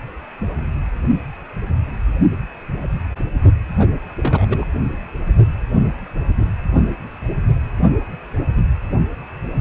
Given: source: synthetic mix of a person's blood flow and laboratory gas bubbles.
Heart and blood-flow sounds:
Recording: Doppler ultrasound of blood flow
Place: precordium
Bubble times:
3.80-3.88 s: bubbles
4.18-4.66 s: bubbles
From the record:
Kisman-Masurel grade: 212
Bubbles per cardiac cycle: several, 3 to 8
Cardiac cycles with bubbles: 1 to 10%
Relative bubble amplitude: moderate (0.250 to 0.450)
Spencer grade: 1 (occasional bubble signal discernible with the cardiac motion signal, with majority of cardiac periods free of bubbles)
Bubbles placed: only in the low amplitude regions of the cardiac cycle

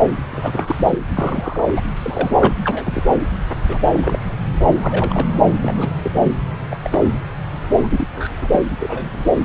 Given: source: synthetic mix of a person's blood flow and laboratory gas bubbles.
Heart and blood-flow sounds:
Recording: Doppler ultrasound of blood flow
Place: subclavian vein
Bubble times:
0.32-0.98 s: bubbles
1.14-1.64 s: bubbles
1.75-1.81 s: bubbles
1.96-2.32 s: bubbles
2.40-2.54 s: bubbles
2.63-3.03 s: bubbles
3.68-3.78 s: bubbles
3.86-4.18 s: bubbles
4.81-5.26 s: bubbles
5.58-5.92 s: bubbles
6.03-6.33 s: bubbles
6.61-6.63 s: bubbles
6.71-6.79 s: bubbles
6.83-7.04 s: bubbles
7.83-8.08 s: bubbles
8.16-8.30 s: bubbles
8.38-8.60 s: bubbles
8.79-9.26 s: bubbles
From the record:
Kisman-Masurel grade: 242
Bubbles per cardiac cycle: several, 3 to 8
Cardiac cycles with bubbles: 100%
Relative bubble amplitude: moderate (0.250 to 0.450)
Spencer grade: 3 (all of the cardiac periods contain showers or single bubble signals, but not dominating or overriding the cardiac motion signals)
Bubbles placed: anywhere in the cardiac cycle

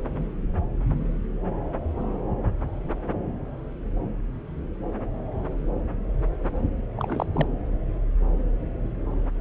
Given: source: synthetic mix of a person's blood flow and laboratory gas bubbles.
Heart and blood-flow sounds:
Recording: Doppler ultrasound of blood flow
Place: subclavian vein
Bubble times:
6.96-7.26 s: bubbles
7.33-7.46 s: bubbles
From the record:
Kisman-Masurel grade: 212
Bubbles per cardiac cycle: several, 3 to 8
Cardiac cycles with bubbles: 1 to 10%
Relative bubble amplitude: moderate (0.250 to 0.450)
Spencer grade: 1 (occasional bubble signal discernible with the cardiac motion signal, with majority of cardiac periods free of bubbles)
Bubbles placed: anywhere in the cardiac cycle

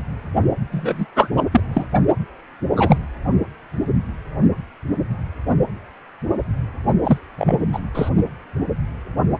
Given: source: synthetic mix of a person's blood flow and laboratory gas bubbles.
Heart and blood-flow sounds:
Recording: Doppler ultrasound of blood flow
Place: precordium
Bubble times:
0.71-1.05 s: bubbles
1.15-1.30 s: bubbles
1.36-1.42 s: bubbles
1.51-1.60 s: bubbles
1.73-1.86 s: bubbles
2.75-2.98 s: bubbles
7.04-7.18 s: bubbles
7.38-7.63 s: bubbles
7.72-7.79 s: bubbles
7.94-8.10 s: bubbles
From the record:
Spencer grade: 2 (many but less than half of the cardiac periods contain bubble signals, singularly or in groups)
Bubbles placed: only in the low amplitude regions of the cardiac cycle

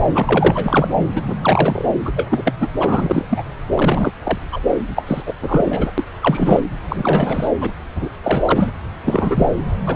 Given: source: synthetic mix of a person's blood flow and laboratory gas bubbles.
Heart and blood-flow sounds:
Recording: Doppler ultrasound of blood flow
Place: subclavian vein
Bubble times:
0.11-0.88 s: bubbles
1.15-1.22 s: bubbles
1.27-1.34 s: bubbles
1.41-1.85 s: bubbles
2.05-2.12 s: bubbles
2.16-2.43 s: bubbles
2.45-2.53 s: bubbles
2.60-2.68 s: bubbles
2.80-3.27 s: bubbles
3.29-3.43 s: bubbles
3.74-4.12 s: bubbles
4.24-4.38 s: bubbles
4.51-4.61 s: bubbles
4.96-5.04 s: bubbles
5.07-5.22 s: bubbles
5.26-5.33 s: bubbles
5.42-5.91 s: bubbles
5.97-6.04 s: bubbles
6.21-6.60 s: bubbles
6.82-7.47 s: bubbles
7.60-7.71 s: bubbles
7.95-8.09 s: bubbles
8.23-8.70 s: bubbles
9.04-9.46 s: bubbles
9.86-9.96 s: bubbles
From the record:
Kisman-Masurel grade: 343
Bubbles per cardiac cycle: rolling drumbeat, 9 or more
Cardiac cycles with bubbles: 100%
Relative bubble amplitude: loud (0.450 to 0.775)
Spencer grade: 3 (all of the cardiac periods contain showers or single bubble signals, but not dominating or overriding the cardiac motion signals)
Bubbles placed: anywhere in the cardiac cycle

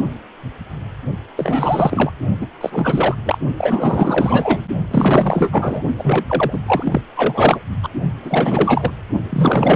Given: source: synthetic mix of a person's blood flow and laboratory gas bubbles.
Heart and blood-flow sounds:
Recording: Doppler ultrasound of blood flow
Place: precordium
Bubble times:
1.36-2.11 s: bubbles
2.40-2.48 s: bubbles
2.60-3.15 s: bubbles
3.25-3.38 s: bubbles
3.57-4.62 s: bubbles
4.90-5.83 s: bubbles
5.97-6.24 s: bubbles
6.27-6.60 s: bubbles
6.66-7.01 s: bubbles
7.15-7.59 s: bubbles
7.82-7.88 s: bubbles
8.22-8.92 s: bubbles
9.29-9.76 s: bubbles
From the record:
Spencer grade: 4 (maximum detectable bubble signal sounding continuously throughout systole and diastole of every cardiac period, and overriding the amplitude of the normal cardiac signals)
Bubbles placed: only in the low amplitude regions of the cardiac cycle

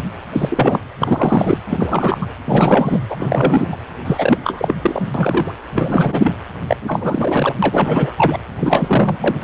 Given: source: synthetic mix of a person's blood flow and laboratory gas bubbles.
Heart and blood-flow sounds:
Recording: Doppler ultrasound of blood flow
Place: precordium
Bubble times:
0.32-0.79 s: bubbles
1.00-1.58 s: bubbles
1.69-2.18 s: bubbles
2.21-2.26 s: bubbles
2.44-2.99 s: bubbles
3.09-3.68 s: bubbles
3.72-3.76 s: bubbles
4.04-4.38 s: bubbles
4.43-4.75 s: bubbles
4.81-5.09 s: bubbles
5.14-5.51 s: bubbles
5.75-6.33 s: bubbles
6.67-6.76 s: bubbles
6.88-7.57 s: bubbles
7.62-8.38 s: bubbles
8.56-9.18 s: bubbles
9.21-9.44 s: bubbles
From the record:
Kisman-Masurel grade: 333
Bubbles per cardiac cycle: rolling drumbeat, 9 or more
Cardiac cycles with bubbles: 50 to 99%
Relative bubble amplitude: loud (0.450 to 0.775)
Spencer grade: 3 (all of the cardiac periods contain showers or single bubble signals, but not dominating or overriding the cardiac motion signals)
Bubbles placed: anywhere in the cardiac cycle

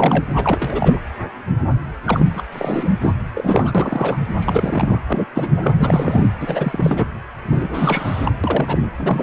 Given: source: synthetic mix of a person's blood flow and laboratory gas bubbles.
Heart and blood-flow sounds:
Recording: Doppler ultrasound of blood flow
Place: precordium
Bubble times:
0.00-0.24 s: bubbles
0.36-0.99 s: bubbles
2.04-2.42 s: bubbles
2.52-2.92 s: bubbles
3.00-3.13 s: bubbles
3.33-4.17 s: bubbles
4.39-5.01 s: bubbles
5.07-5.25 s: bubbles
5.34-5.74 s: bubbles
5.78-6.27 s: bubbles
6.39-7.06 s: bubbles
7.50-8.31 s: bubbles
8.44-8.91 s: bubbles
8.98-9.23 s: bubbles
From the record:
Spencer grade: 3 (all of the cardiac periods contain showers or single bubble signals, but not dominating or overriding the cardiac motion signals)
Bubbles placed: anywhere in the cardiac cycle

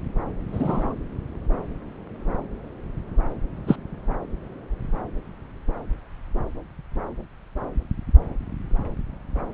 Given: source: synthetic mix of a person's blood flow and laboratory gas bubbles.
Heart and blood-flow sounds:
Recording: Doppler ultrasound of blood flow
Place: subclavian vein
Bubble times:
0.53-0.94 s: bubbles
3.67-3.76 s: bubbles
From the record:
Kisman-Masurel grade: 113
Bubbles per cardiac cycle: 1 to 2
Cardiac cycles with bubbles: 1 to 10%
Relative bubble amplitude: loud (0.450 to 0.775)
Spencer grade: 1 (occasional bubble signal discernible with the cardiac motion signal, with majority of cardiac periods free of bubbles)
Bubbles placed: anywhere in the cardiac cycle

